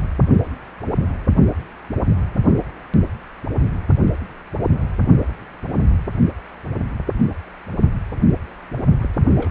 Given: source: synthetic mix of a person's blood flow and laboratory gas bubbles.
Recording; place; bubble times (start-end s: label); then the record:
Doppler ultrasound of blood flow; precordium
8.98-9.10 s: bubbles
9.35-9.51 s: bubbles
From the record:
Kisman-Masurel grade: 211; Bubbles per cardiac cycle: several, 3 to 8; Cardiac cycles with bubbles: 1 to 10%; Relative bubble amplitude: barely perceptible (0.100 to 0.250); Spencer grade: 1 (occasional bubble signal discernible with the cardiac motion signal, with majority of cardiac periods free of bubbles); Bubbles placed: only in the low amplitude regions of the cardiac cycle